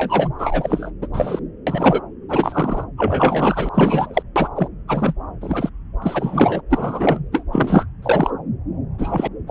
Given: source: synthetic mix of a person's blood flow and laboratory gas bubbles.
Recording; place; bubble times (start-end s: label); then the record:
Doppler ultrasound of blood flow; subclavian vein
0.00-0.29 s: bubbles
0.38-0.91 s: bubbles
1.02-1.07 s: bubbles
1.13-1.40 s: bubbles
1.67-2.01 s: bubbles
2.29-2.84 s: bubbles
2.97-3.69 s: bubbles
3.74-4.22 s: bubbles
4.36-4.49 s: bubbles
4.55-4.68 s: bubbles
4.88-5.13 s: bubbles
5.41-5.69 s: bubbles
6.02-6.62 s: bubbles
6.70-7.19 s: bubbles
7.32-7.43 s: bubbles
7.52-7.86 s: bubbles
8.03-8.30 s: bubbles
8.98-9.28 s: bubbles
9.47-9.51 s: bubbles
From the record:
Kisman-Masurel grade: 243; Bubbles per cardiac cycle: several, 3 to 8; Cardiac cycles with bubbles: 100%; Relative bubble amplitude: loud (0.450 to 0.775); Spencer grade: 3 (all of the cardiac periods contain showers or single bubble signals, but not dominating or overriding the cardiac motion signals); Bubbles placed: anywhere in the cardiac cycle